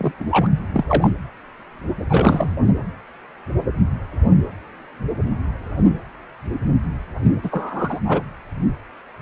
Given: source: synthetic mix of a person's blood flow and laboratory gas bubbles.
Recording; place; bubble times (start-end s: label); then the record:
Doppler ultrasound of blood flow; precordium
0.00-0.12 s: bubbles
0.20-0.25 s: bubbles
0.30-0.47 s: bubbles
0.73-0.84 s: bubbles
0.89-1.10 s: bubbles
2.10-2.56 s: bubbles
7.23-7.32 s: bubbles
7.42-8.00 s: bubbles
8.05-8.23 s: bubbles
From the record:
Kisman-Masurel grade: 223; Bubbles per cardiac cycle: several, 3 to 8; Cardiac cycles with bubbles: 10 to 50%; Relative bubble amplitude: loud (0.450 to 0.775); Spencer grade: 2 (many but less than half of the cardiac periods contain bubble signals, singularly or in groups); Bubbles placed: anywhere in the cardiac cycle